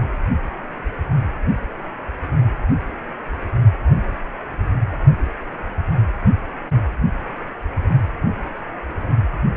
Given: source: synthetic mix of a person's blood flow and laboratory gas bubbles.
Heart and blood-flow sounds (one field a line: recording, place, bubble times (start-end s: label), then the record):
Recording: Doppler ultrasound of blood flow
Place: precordium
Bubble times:
no bubbles
From the record:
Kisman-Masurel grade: 000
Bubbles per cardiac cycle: 0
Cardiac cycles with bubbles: 0%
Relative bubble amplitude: no bubbles discernible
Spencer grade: 0 (complete lack of bubble signals)